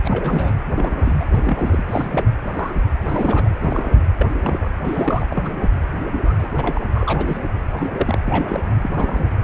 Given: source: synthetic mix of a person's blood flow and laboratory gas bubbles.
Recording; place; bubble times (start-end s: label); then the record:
Doppler ultrasound of blood flow; precordium
0.04-0.55 s: bubbles
0.72-1.25 s: bubbles
1.33-1.82 s: bubbles
1.86-2.34 s: bubbles
2.48-2.93 s: bubbles
3.04-3.50 s: bubbles
3.60-4.00 s: bubbles
4.19-4.27 s: bubbles
4.32-4.71 s: bubbles
4.83-5.27 s: bubbles
5.29-5.70 s: bubbles
6.11-6.81 s: bubbles
6.94-7.40 s: bubbles
7.77-8.18 s: bubbles
8.25-8.75 s: bubbles
8.82-8.90 s: bubbles
8.94-9.30 s: bubbles
From the record:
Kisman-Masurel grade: 242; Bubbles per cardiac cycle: several, 3 to 8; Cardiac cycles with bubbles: 100%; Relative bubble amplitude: moderate (0.250 to 0.450); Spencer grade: 3 (all of the cardiac periods contain showers or single bubble signals, but not dominating or overriding the cardiac motion signals); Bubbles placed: anywhere in the cardiac cycle